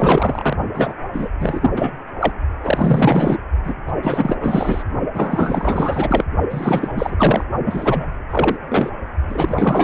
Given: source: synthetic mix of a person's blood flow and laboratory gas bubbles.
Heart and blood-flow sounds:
Doppler ultrasound of blood flow; precordium
0.00-0.55 s: bubbles
0.73-0.93 s: bubbles
1.12-1.28 s: bubbles
1.40-1.71 s: bubbles
1.76-1.94 s: bubbles
2.20-2.32 s: bubbles
2.62-3.39 s: bubbles
3.64-3.74 s: bubbles
3.88-3.93 s: bubbles
4.02-4.36 s: bubbles
4.40-4.83 s: bubbles
5.13-6.24 s: bubbles
6.50-7.45 s: bubbles
7.65-8.13 s: bubbles
8.30-8.57 s: bubbles
8.68-8.91 s: bubbles
9.28-9.84 s: bubbles
From the record:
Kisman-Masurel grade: 444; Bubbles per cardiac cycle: continuous sound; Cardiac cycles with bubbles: 100%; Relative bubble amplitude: maximal (0.775 to 0.999); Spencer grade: 4 (maximum detectable bubble signal sounding continuously throughout systole and diastole of every cardiac period, and overriding the amplitude of the normal cardiac signals); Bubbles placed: only in the low amplitude regions of the cardiac cycle

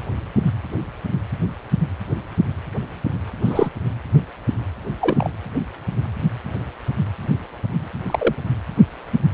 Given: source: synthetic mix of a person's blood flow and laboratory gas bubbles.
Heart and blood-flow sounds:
Doppler ultrasound of blood flow; precordium
3.44-3.70 s: bubbles
5.00-5.30 s: bubbles
8.07-8.35 s: bubbles
From the record:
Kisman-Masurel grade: 122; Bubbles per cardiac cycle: 1 to 2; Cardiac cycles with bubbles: 10 to 50%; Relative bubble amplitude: moderate (0.250 to 0.450); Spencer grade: 2 (many but less than half of the cardiac periods contain bubble signals, singularly or in groups); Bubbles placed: anywhere in the cardiac cycle

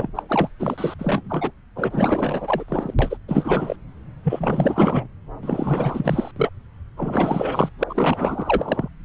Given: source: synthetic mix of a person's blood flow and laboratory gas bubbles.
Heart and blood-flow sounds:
Doppler ultrasound of blood flow; subclavian vein
0.00-0.10 s: bubbles
0.15-0.23 s: bubbles
0.28-0.49 s: bubbles
0.59-0.94 s: bubbles
0.99-1.51 s: bubbles
1.75-2.65 s: bubbles
2.68-2.94 s: bubbles
2.98-3.17 s: bubbles
3.28-3.76 s: bubbles
4.23-5.07 s: bubbles
5.42-6.31 s: bubbles
6.36-6.49 s: bubbles
6.96-7.70 s: bubbles
7.79-7.84 s: bubbles
7.88-8.88 s: bubbles
From the record:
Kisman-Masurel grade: 444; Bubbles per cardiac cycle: continuous sound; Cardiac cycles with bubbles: 100%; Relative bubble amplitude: maximal (0.775 to 0.999); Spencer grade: 4 (maximum detectable bubble signal sounding continuously throughout systole and diastole of every cardiac period, and overriding the amplitude of the normal cardiac signals); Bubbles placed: anywhere in the cardiac cycle

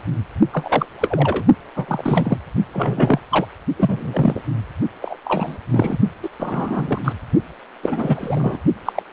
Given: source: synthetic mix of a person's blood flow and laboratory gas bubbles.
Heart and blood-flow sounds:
Doppler ultrasound of blood flow; precordium
0.52-0.86 s: bubbles
1.00-1.45 s: bubbles
1.76-2.38 s: bubbles
2.73-3.19 s: bubbles
3.31-3.46 s: bubbles
3.77-4.42 s: bubbles
5.01-5.17 s: bubbles
5.25-5.58 s: bubbles
5.71-5.98 s: bubbles
6.23-6.29 s: bubbles
6.39-6.99 s: bubbles
7.04-7.13 s: bubbles
7.83-8.61 s: bubbles
8.86-8.92 s: bubbles
8.95-9.02 s: bubbles
From the record:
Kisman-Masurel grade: 243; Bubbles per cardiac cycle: several, 3 to 8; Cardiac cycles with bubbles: 100%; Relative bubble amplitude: loud (0.450 to 0.775); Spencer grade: 3 (all of the cardiac periods contain showers or single bubble signals, but not dominating or overriding the cardiac motion signals); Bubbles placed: only in the low amplitude regions of the cardiac cycle

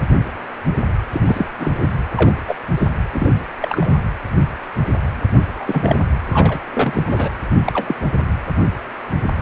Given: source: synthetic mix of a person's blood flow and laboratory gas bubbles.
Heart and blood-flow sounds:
Doppler ultrasound of blood flow; precordium
1.11-1.22 s: bubbles
1.26-1.48 s: bubbles
1.59-1.74 s: bubbles
1.80-1.88 s: bubbles
2.16-2.33 s: bubbles
2.47-2.55 s: bubbles
2.77-2.88 s: bubbles
3.12-3.33 s: bubbles
3.62-3.99 s: bubbles
5.34-5.44 s: bubbles
5.55-5.98 s: bubbles
6.31-6.61 s: bubbles
6.73-7.03 s: bubbles
7.07-7.29 s: bubbles
7.66-7.95 s: bubbles
From the record:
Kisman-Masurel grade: 232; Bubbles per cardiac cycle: several, 3 to 8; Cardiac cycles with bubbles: 50 to 99%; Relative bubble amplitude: moderate (0.250 to 0.450); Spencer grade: 3 (all of the cardiac periods contain showers or single bubble signals, but not dominating or overriding the cardiac motion signals); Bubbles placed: anywhere in the cardiac cycle

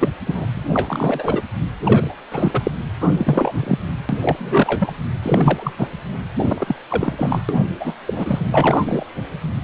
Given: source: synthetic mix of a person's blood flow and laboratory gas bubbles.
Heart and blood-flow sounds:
Doppler ultrasound of blood flow; precordium
0.00-0.08 s: bubbles
0.26-0.46 s: bubbles
0.54-1.42 s: bubbles
1.83-2.15 s: bubbles
2.31-2.72 s: bubbles
3.01-3.53 s: bubbles
3.56-3.79 s: bubbles
4.09-4.18 s: bubbles
4.21-4.92 s: bubbles
5.22-5.72 s: bubbles
5.77-5.88 s: bubbles
6.34-6.75 s: bubbles
6.88-7.42 s: bubbles
7.48-7.57 s: bubbles
7.80-7.94 s: bubbles
8.06-8.46 s: bubbles
8.50-9.06 s: bubbles
9.62-9.64 s: bubbles
From the record:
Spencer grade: 3 (all of the cardiac periods contain showers or single bubble signals, but not dominating or overriding the cardiac motion signals); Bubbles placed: anywhere in the cardiac cycle

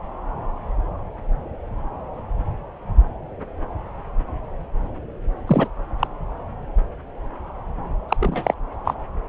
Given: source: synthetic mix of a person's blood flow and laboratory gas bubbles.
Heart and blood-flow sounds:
Doppler ultrasound of blood flow; subclavian vein
5.47-5.68 s: bubbles
5.99-6.07 s: bubbles
8.08-8.16 s: bubbles
8.20-8.54 s: bubbles
8.84-8.94 s: bubbles
From the record:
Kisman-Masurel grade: 223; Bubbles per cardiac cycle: several, 3 to 8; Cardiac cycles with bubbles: 10 to 50%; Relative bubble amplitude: loud (0.450 to 0.775); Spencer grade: 2 (many but less than half of the cardiac periods contain bubble signals, singularly or in groups); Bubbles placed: anywhere in the cardiac cycle

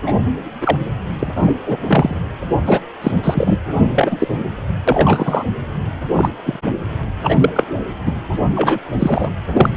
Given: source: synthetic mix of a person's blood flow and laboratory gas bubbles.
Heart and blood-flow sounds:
Doppler ultrasound of blood flow; precordium
0.06-0.13 s: bubbles
0.60-0.77 s: bubbles
1.19-1.56 s: bubbles
1.66-1.77 s: bubbles
1.88-2.15 s: bubbles
2.65-2.80 s: bubbles
3.01-3.11 s: bubbles
3.23-3.58 s: bubbles
3.95-4.37 s: bubbles
4.88-5.43 s: bubbles
6.12-6.29 s: bubbles
6.45-6.59 s: bubbles
7.19-7.50 s: bubbles
7.53-7.63 s: bubbles
8.05-8.13 s: bubbles
8.32-8.38 s: bubbles
8.55-8.79 s: bubbles
8.99-9.30 s: bubbles
9.53-9.70 s: bubbles
From the record:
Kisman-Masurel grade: 243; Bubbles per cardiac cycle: several, 3 to 8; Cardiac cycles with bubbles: 100%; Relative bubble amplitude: loud (0.450 to 0.775); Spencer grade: 3 (all of the cardiac periods contain showers or single bubble signals, but not dominating or overriding the cardiac motion signals); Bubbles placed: anywhere in the cardiac cycle

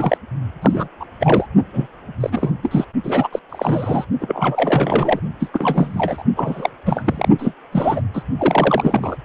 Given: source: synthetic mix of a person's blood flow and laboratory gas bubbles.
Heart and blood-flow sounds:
Doppler ultrasound of blood flow; precordium
0.00-0.17 s: bubbles
0.61-0.88 s: bubbles
1.00-1.05 s: bubbles
1.20-1.46 s: bubbles
1.72-1.87 s: bubbles
2.20-2.52 s: bubbles
2.62-2.85 s: bubbles
3.04-3.28 s: bubbles
3.32-3.40 s: bubbles
3.49-4.05 s: bubbles
4.20-5.20 s: bubbles
5.39-5.50 s: bubbles
5.53-6.23 s: bubbles
6.35-6.70 s: bubbles
6.86-7.29 s: bubbles
7.38-7.53 s: bubbles
7.72-8.01 s: bubbles
8.13-8.23 s: bubbles
8.38-9.17 s: bubbles
From the record:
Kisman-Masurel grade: 342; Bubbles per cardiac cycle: rolling drumbeat, 9 or more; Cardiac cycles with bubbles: 100%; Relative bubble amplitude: moderate (0.250 to 0.450); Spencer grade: 3 (all of the cardiac periods contain showers or single bubble signals, but not dominating or overriding the cardiac motion signals); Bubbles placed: only in the low amplitude regions of the cardiac cycle

